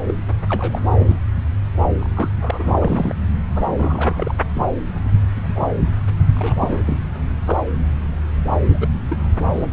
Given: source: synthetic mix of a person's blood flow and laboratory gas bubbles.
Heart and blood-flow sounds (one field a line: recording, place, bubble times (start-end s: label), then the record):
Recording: Doppler ultrasound of blood flow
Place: subclavian vein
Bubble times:
0.07-0.14 s: bubbles
0.49-1.17 s: bubbles
1.99-2.34 s: bubbles
2.41-3.13 s: bubbles
3.47-3.71 s: bubbles
3.78-4.32 s: bubbles
4.54-4.66 s: bubbles
5.36-5.78 s: bubbles
6.36-6.98 s: bubbles
7.46-7.61 s: bubbles
8.68-8.88 s: bubbles
9.09-9.17 s: bubbles
9.53-9.67 s: bubbles
9.71-9.73 s: bubbles
From the record:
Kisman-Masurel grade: 242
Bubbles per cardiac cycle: several, 3 to 8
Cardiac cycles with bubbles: 100%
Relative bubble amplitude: moderate (0.250 to 0.450)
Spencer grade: 3 (all of the cardiac periods contain showers or single bubble signals, but not dominating or overriding the cardiac motion signals)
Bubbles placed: anywhere in the cardiac cycle